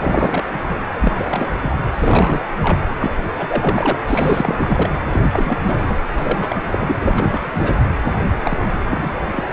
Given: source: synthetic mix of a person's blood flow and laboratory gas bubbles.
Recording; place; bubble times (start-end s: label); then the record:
Doppler ultrasound of blood flow; precordium
0.01-0.44 s: bubbles
0.51-0.76 s: bubbles
1.01-1.12 s: bubbles
1.17-1.48 s: bubbles
1.59-1.77 s: bubbles
1.94-2.41 s: bubbles
2.60-2.78 s: bubbles
3.00-3.13 s: bubbles
3.37-3.97 s: bubbles
4.05-4.89 s: bubbles
5.09-5.26 s: bubbles
5.31-5.58 s: bubbles
5.66-5.98 s: bubbles
6.12-6.63 s: bubbles
6.71-6.99 s: bubbles
7.02-7.89 s: bubbles
8.43-8.68 s: bubbles
8.90-9.12 s: bubbles
9.30-9.44 s: bubbles
From the record:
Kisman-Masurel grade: 332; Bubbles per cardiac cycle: rolling drumbeat, 9 or more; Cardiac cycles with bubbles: 50 to 99%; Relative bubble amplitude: moderate (0.250 to 0.450); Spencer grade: 3 (all of the cardiac periods contain showers or single bubble signals, but not dominating or overriding the cardiac motion signals); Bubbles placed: anywhere in the cardiac cycle